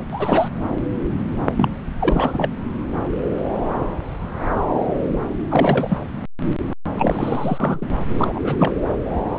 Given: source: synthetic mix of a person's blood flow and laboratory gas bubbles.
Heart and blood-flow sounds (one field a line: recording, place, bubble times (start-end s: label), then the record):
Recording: Doppler ultrasound of blood flow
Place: subclavian vein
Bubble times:
0.11-0.48 s: bubbles
1.56-1.70 s: bubbles
1.99-2.50 s: bubbles
5.50-5.98 s: bubbles
6.88-7.86 s: bubbles
8.19-8.74 s: bubbles
From the record:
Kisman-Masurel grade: 222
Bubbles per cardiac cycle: several, 3 to 8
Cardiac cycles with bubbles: 10 to 50%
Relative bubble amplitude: moderate (0.250 to 0.450)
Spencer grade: 2 (many but less than half of the cardiac periods contain bubble signals, singularly or in groups)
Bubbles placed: anywhere in the cardiac cycle